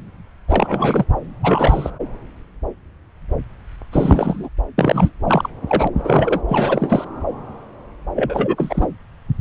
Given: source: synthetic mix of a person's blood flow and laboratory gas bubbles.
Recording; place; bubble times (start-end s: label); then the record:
Doppler ultrasound of blood flow; subclavian vein
0.48-1.04 s: bubbles
1.42-1.90 s: bubbles
3.92-4.48 s: bubbles
4.77-5.11 s: bubbles
5.26-5.48 s: bubbles
5.67-5.88 s: bubbles
5.96-6.42 s: bubbles
6.48-7.04 s: bubbles
8.15-8.88 s: bubbles
From the record:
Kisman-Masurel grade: 333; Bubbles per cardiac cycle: rolling drumbeat, 9 or more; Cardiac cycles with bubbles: 50 to 99%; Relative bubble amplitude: loud (0.450 to 0.775); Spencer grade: 3 (all of the cardiac periods contain showers or single bubble signals, but not dominating or overriding the cardiac motion signals); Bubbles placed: anywhere in the cardiac cycle